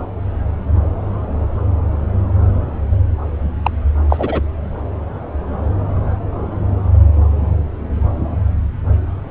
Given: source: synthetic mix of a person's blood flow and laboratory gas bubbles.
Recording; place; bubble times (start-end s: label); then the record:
Doppler ultrasound of blood flow; subclavian vein
3.63-3.71 s: bubbles
4.10-4.41 s: bubbles
From the record:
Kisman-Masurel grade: 213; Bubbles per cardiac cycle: several, 3 to 8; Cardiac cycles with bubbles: 1 to 10%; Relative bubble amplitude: loud (0.450 to 0.775); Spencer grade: 1 (occasional bubble signal discernible with the cardiac motion signal, with majority of cardiac periods free of bubbles); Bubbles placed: anywhere in the cardiac cycle